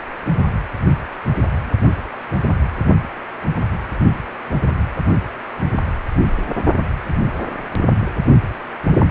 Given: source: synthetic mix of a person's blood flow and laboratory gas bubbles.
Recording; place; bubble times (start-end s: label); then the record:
Doppler ultrasound of blood flow; precordium
0.10-0.15 s: bubbles
From the record:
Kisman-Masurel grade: 111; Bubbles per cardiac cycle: 1 to 2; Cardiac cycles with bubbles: 1 to 10%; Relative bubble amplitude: barely perceptible (0.100 to 0.250); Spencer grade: 1 (occasional bubble signal discernible with the cardiac motion signal, with majority of cardiac periods free of bubbles); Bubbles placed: only in the low amplitude regions of the cardiac cycle